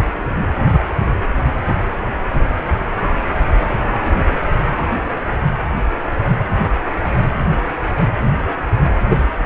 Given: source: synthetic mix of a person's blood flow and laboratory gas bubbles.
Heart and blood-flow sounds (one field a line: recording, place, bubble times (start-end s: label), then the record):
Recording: Doppler ultrasound of blood flow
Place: precordium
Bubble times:
9.10-9.16 s: bubbles
From the record:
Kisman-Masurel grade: 113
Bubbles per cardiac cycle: 1 to 2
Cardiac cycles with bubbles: 1 to 10%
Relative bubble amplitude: loud (0.450 to 0.775)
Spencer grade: 1 (occasional bubble signal discernible with the cardiac motion signal, with majority of cardiac periods free of bubbles)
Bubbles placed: anywhere in the cardiac cycle